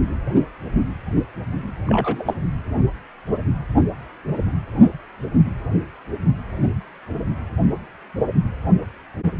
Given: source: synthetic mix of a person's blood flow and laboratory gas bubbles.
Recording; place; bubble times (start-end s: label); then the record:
Doppler ultrasound of blood flow; precordium
1.86-2.34 s: bubbles
From the record:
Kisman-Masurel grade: 112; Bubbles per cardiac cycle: 1 to 2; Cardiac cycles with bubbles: 1 to 10%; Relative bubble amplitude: moderate (0.250 to 0.450); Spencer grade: 1 (occasional bubble signal discernible with the cardiac motion signal, with majority of cardiac periods free of bubbles); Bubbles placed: anywhere in the cardiac cycle